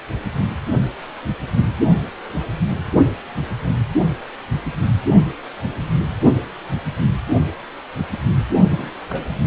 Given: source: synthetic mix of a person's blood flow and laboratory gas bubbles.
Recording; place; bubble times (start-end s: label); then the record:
Doppler ultrasound of blood flow; precordium
8.71-8.93 s: bubbles
9.09-9.26 s: bubbles
From the record:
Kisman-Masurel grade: 112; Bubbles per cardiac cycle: 1 to 2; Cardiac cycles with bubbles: 1 to 10%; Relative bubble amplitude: moderate (0.250 to 0.450); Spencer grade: 1 (occasional bubble signal discernible with the cardiac motion signal, with majority of cardiac periods free of bubbles); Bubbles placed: only in the low amplitude regions of the cardiac cycle